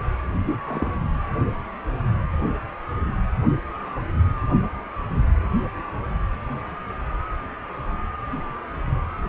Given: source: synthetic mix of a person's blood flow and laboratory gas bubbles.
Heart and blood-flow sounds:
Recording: Doppler ultrasound of blood flow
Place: precordium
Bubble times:
0.46-0.56 s: bubbles
0.67-0.94 s: bubbles
From the record:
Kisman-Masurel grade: 211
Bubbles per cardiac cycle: several, 3 to 8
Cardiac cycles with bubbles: 1 to 10%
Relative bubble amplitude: barely perceptible (0.100 to 0.250)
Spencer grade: 1 (occasional bubble signal discernible with the cardiac motion signal, with majority of cardiac periods free of bubbles)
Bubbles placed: anywhere in the cardiac cycle

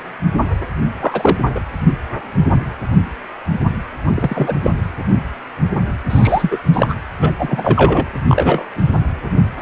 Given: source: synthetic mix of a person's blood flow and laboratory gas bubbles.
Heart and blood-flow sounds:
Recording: Doppler ultrasound of blood flow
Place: precordium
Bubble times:
1.00-1.38 s: bubbles
1.49-1.61 s: bubbles
4.06-4.11 s: bubbles
4.15-4.55 s: bubbles
4.63-4.71 s: bubbles
6.09-6.58 s: bubbles
6.72-6.96 s: bubbles
7.21-7.32 s: bubbles
7.39-8.07 s: bubbles
8.28-8.68 s: bubbles
From the record:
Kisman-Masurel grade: 233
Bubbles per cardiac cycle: several, 3 to 8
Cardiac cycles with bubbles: 50 to 99%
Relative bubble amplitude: loud (0.450 to 0.775)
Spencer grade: 3 (all of the cardiac periods contain showers or single bubble signals, but not dominating or overriding the cardiac motion signals)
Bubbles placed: anywhere in the cardiac cycle

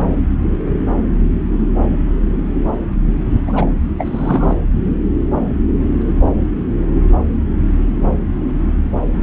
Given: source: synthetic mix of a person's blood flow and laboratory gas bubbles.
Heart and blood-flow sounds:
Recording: Doppler ultrasound of blood flow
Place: subclavian vein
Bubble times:
3.47-3.73 s: bubbles
3.98-4.57 s: bubbles
From the record:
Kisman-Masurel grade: 212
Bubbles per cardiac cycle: several, 3 to 8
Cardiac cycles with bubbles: 1 to 10%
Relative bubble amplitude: moderate (0.250 to 0.450)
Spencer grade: 1 (occasional bubble signal discernible with the cardiac motion signal, with majority of cardiac periods free of bubbles)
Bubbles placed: anywhere in the cardiac cycle

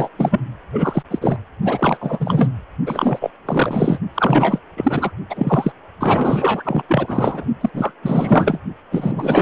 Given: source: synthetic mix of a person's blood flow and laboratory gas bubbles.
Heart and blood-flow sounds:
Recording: Doppler ultrasound of blood flow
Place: precordium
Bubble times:
0.00-0.09 s: bubbles
0.18-0.40 s: bubbles
0.72-1.03 s: bubbles
1.10-1.40 s: bubbles
1.62-1.97 s: bubbles
2.00-2.52 s: bubbles
2.86-3.31 s: bubbles
3.45-3.98 s: bubbles
4.14-4.59 s: bubbles
4.76-5.11 s: bubbles
5.29-5.72 s: bubbles
6.00-6.82 s: bubbles
6.88-7.45 s: bubbles
7.61-7.70 s: bubbles
7.73-7.93 s: bubbles
8.02-8.61 s: bubbles
8.91-9.42 s: bubbles
From the record:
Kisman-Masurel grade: 444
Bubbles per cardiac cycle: continuous sound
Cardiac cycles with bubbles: 100%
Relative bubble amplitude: maximal (0.775 to 0.999)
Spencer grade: 4 (maximum detectable bubble signal sounding continuously throughout systole and diastole of every cardiac period, and overriding the amplitude of the normal cardiac signals)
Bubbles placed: only in the low amplitude regions of the cardiac cycle

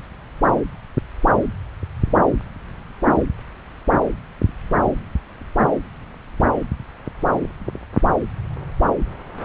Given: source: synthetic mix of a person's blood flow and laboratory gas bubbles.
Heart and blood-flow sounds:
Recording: Doppler ultrasound of blood flow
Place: subclavian vein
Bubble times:
3.09-3.17 s: bubbles
From the record:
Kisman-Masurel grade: 111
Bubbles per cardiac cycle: 1 to 2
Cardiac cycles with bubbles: 1 to 10%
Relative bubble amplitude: barely perceptible (0.100 to 0.250)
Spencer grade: 1 (occasional bubble signal discernible with the cardiac motion signal, with majority of cardiac periods free of bubbles)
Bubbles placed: anywhere in the cardiac cycle

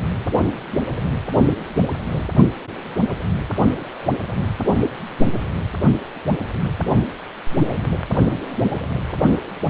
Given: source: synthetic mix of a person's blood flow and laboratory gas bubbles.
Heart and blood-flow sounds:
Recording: Doppler ultrasound of blood flow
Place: precordium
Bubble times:
no bubbles
From the record:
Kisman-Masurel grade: 000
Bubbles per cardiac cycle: 0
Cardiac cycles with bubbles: 0%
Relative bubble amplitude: no bubbles discernible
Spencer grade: 0 (complete lack of bubble signals)

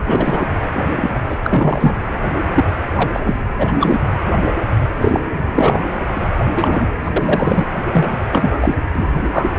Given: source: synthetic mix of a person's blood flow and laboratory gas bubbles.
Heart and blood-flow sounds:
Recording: Doppler ultrasound of blood flow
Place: precordium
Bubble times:
0.07-0.47 s: bubbles
0.74-1.20 s: bubbles
1.28-1.37 s: bubbles
1.46-1.95 s: bubbles
2.55-2.64 s: bubbles
2.97-3.10 s: bubbles
3.13-3.20 s: bubbles
3.26-3.40 s: bubbles
3.58-3.73 s: bubbles
3.79-3.99 s: bubbles
4.99-5.25 s: bubbles
5.54-5.79 s: bubbles
6.16-6.27 s: bubbles
6.54-6.91 s: bubbles
7.03-7.12 s: bubbles
7.16-7.66 s: bubbles
7.92-8.15 s: bubbles
8.29-8.74 s: bubbles
8.95-9.06 s: bubbles
9.32-9.46 s: bubbles
9.56-9.59 s: bubbles
From the record:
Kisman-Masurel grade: 243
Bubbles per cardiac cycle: several, 3 to 8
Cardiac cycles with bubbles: 100%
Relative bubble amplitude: loud (0.450 to 0.775)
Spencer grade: 3 (all of the cardiac periods contain showers or single bubble signals, but not dominating or overriding the cardiac motion signals)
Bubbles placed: anywhere in the cardiac cycle

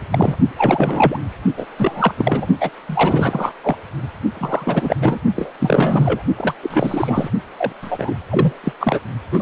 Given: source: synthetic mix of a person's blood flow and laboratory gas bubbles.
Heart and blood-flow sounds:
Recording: Doppler ultrasound of blood flow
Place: precordium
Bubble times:
0.11-0.36 s: bubbles
0.57-1.18 s: bubbles
1.56-1.67 s: bubbles
1.78-2.15 s: bubbles
2.17-2.47 s: bubbles
2.60-2.69 s: bubbles
2.88-3.52 s: bubbles
3.62-3.76 s: bubbles
4.33-4.96 s: bubbles
5.00-5.19 s: bubbles
5.36-5.51 s: bubbles
5.59-6.22 s: bubbles
6.38-6.54 s: bubbles
6.62-7.29 s: bubbles
7.58-7.72 s: bubbles
7.82-8.14 s: bubbles
8.29-8.59 s: bubbles
8.63-8.72 s: bubbles
8.79-9.00 s: bubbles
9.32-9.42 s: bubbles
From the record:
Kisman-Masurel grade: 343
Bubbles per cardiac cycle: rolling drumbeat, 9 or more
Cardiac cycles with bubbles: 100%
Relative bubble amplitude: loud (0.450 to 0.775)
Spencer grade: 3 (all of the cardiac periods contain showers or single bubble signals, but not dominating or overriding the cardiac motion signals)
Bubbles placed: only in the low amplitude regions of the cardiac cycle

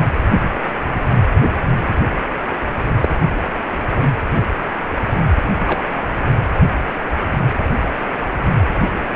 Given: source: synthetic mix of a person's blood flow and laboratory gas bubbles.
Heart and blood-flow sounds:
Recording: Doppler ultrasound of blood flow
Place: precordium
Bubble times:
3.00-3.08 s: bubbles
5.67-5.80 s: bubbles
From the record:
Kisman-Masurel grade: 123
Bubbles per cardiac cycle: 1 to 2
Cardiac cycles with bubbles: 10 to 50%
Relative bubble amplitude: loud (0.450 to 0.775)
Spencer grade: 2 (many but less than half of the cardiac periods contain bubble signals, singularly or in groups)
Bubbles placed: anywhere in the cardiac cycle

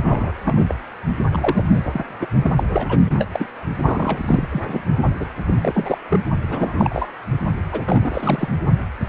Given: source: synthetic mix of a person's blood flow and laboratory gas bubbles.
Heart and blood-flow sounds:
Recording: Doppler ultrasound of blood flow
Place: precordium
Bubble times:
0.00-0.33 s: bubbles
0.45-0.67 s: bubbles
0.69-0.74 s: bubbles
1.32-2.05 s: bubbles
2.19-2.27 s: bubbles
2.44-2.50 s: bubbles
2.56-2.98 s: bubbles
3.02-3.28 s: bubbles
3.33-3.48 s: bubbles
3.85-4.65 s: bubbles
4.67-4.82 s: bubbles
5.20-5.26 s: bubbles
5.46-5.98 s: bubbles
6.09-6.21 s: bubbles
6.42-7.07 s: bubbles
7.72-7.83 s: bubbles
7.85-8.48 s: bubbles
From the record:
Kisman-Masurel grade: 342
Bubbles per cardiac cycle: rolling drumbeat, 9 or more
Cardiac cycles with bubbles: 100%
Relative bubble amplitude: moderate (0.250 to 0.450)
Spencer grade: 3 (all of the cardiac periods contain showers or single bubble signals, but not dominating or overriding the cardiac motion signals)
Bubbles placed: only in the low amplitude regions of the cardiac cycle

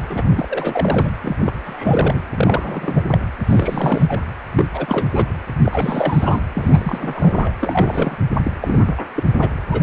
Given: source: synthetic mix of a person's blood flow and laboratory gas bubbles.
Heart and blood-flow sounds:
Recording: Doppler ultrasound of blood flow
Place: precordium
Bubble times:
0.09-0.23 s: bubbles
0.29-0.46 s: bubbles
0.49-1.10 s: bubbles
1.21-1.53 s: bubbles
1.65-2.19 s: bubbles
2.34-3.05 s: bubbles
3.11-3.20 s: bubbles
3.47-4.20 s: bubbles
4.54-4.66 s: bubbles
4.74-5.07 s: bubbles
5.11-5.26 s: bubbles
5.64-6.40 s: bubbles
6.54-7.51 s: bubbles
7.59-8.15 s: bubbles
8.45-8.53 s: bubbles
8.62-9.02 s: bubbles
9.15-9.23 s: bubbles
9.38-9.49 s: bubbles
9.71-9.83 s: bubbles
From the record:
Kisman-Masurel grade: 342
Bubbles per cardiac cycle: rolling drumbeat, 9 or more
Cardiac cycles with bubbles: 100%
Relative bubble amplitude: moderate (0.250 to 0.450)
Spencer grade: 3 (all of the cardiac periods contain showers or single bubble signals, but not dominating or overriding the cardiac motion signals)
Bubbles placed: anywhere in the cardiac cycle

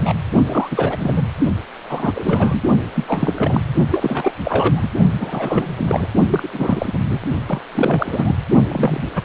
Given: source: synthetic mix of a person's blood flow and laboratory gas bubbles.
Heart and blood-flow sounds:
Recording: Doppler ultrasound of blood flow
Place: precordium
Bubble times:
0.00-0.14 s: bubbles
0.48-1.26 s: bubbles
1.89-2.61 s: bubbles
2.95-3.04 s: bubbles
3.07-3.62 s: bubbles
3.90-4.32 s: bubbles
4.44-4.89 s: bubbles
5.20-5.73 s: bubbles
5.78-6.07 s: bubbles
6.27-6.50 s: bubbles
6.52-6.99 s: bubbles
7.10-7.19 s: bubbles
7.46-7.61 s: bubbles
7.71-8.36 s: bubbles
8.68-9.04 s: bubbles
9.16-9.24 s: bubbles
From the record:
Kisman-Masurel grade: 333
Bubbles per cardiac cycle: rolling drumbeat, 9 or more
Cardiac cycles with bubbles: 50 to 99%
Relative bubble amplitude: loud (0.450 to 0.775)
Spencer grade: 3 (all of the cardiac periods contain showers or single bubble signals, but not dominating or overriding the cardiac motion signals)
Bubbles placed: only in the low amplitude regions of the cardiac cycle

